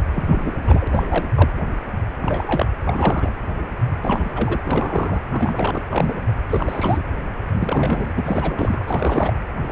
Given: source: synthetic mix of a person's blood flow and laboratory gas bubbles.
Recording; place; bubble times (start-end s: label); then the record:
Doppler ultrasound of blood flow; precordium
0.11-0.87 s: bubbles
0.90-1.30 s: bubbles
1.35-1.50 s: bubbles
2.18-2.66 s: bubbles
2.83-3.35 s: bubbles
4.02-4.61 s: bubbles
4.65-5.21 s: bubbles
5.30-5.82 s: bubbles
5.90-6.32 s: bubbles
6.50-7.01 s: bubbles
7.60-8.11 s: bubbles
8.14-8.84 s: bubbles
8.87-9.33 s: bubbles
9.54-9.72 s: bubbles
From the record:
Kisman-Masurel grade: 332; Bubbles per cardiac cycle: rolling drumbeat, 9 or more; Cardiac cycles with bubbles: 50 to 99%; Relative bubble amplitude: moderate (0.250 to 0.450); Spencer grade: 3 (all of the cardiac periods contain showers or single bubble signals, but not dominating or overriding the cardiac motion signals); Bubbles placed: anywhere in the cardiac cycle